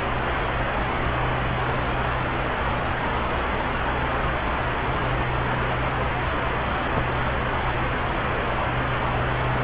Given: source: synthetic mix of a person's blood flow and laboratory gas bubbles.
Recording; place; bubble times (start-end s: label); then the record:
Doppler ultrasound of blood flow; subclavian vein
6.96-7.00 s: bubbles
From the record:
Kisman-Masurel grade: 112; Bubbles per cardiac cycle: 1 to 2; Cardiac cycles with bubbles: 1 to 10%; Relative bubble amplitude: moderate (0.250 to 0.450); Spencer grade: 1 (occasional bubble signal discernible with the cardiac motion signal, with majority of cardiac periods free of bubbles); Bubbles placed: anywhere in the cardiac cycle